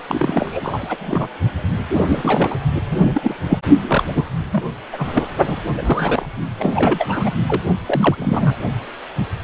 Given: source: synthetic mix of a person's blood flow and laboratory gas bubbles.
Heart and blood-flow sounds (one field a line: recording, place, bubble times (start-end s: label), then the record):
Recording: Doppler ultrasound of blood flow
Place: precordium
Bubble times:
0.07-1.28 s: bubbles
1.93-2.01 s: bubbles
2.08-2.58 s: bubbles
2.90-3.36 s: bubbles
3.47-3.58 s: bubbles
3.87-4.05 s: bubbles
4.15-4.25 s: bubbles
4.51-4.65 s: bubbles
4.93-5.32 s: bubbles
5.42-5.61 s: bubbles
5.74-6.25 s: bubbles
6.58-7.34 s: bubbles
7.46-7.62 s: bubbles
7.86-8.56 s: bubbles
From the record:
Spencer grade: 3 (all of the cardiac periods contain showers or single bubble signals, but not dominating or overriding the cardiac motion signals)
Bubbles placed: only in the low amplitude regions of the cardiac cycle